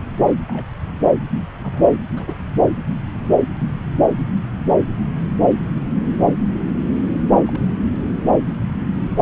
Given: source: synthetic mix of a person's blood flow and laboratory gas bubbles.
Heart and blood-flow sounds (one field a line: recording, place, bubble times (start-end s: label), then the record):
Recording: Doppler ultrasound of blood flow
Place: subclavian vein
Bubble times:
0.47-0.69 s: bubbles
1.60-2.01 s: bubbles
2.14-2.37 s: bubbles
7.46-7.60 s: bubbles
From the record:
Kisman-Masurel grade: 121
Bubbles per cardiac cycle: 1 to 2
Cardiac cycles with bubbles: 10 to 50%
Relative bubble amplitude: barely perceptible (0.100 to 0.250)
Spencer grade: 2 (many but less than half of the cardiac periods contain bubble signals, singularly or in groups)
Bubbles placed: anywhere in the cardiac cycle